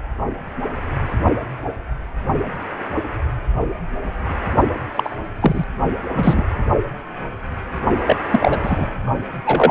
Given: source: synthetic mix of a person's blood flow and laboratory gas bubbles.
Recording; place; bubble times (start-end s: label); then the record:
Doppler ultrasound of blood flow; precordium
4.95-5.17 s: bubbles
5.40-5.65 s: bubbles
6.15-6.44 s: bubbles
8.06-8.17 s: bubbles
8.30-8.87 s: bubbles
9.46-9.71 s: bubbles
From the record:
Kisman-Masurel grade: 223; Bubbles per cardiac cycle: several, 3 to 8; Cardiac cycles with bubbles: 10 to 50%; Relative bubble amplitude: loud (0.450 to 0.775); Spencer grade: 2 (many but less than half of the cardiac periods contain bubble signals, singularly or in groups); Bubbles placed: only in the low amplitude regions of the cardiac cycle